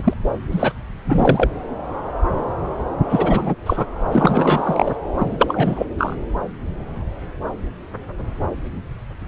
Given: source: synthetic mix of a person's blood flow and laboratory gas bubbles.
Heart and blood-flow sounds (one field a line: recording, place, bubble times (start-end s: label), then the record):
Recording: Doppler ultrasound of blood flow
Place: subclavian vein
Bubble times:
0.00-0.14 s: bubbles
0.51-0.71 s: bubbles
1.06-1.50 s: bubbles
3.08-3.55 s: bubbles
3.66-3.86 s: bubbles
4.12-4.96 s: bubbles
5.13-5.86 s: bubbles
5.97-6.16 s: bubbles
From the record:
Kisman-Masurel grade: 333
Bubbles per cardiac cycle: rolling drumbeat, 9 or more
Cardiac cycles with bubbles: 50 to 99%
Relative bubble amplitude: loud (0.450 to 0.775)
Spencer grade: 3 (all of the cardiac periods contain showers or single bubble signals, but not dominating or overriding the cardiac motion signals)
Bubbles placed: anywhere in the cardiac cycle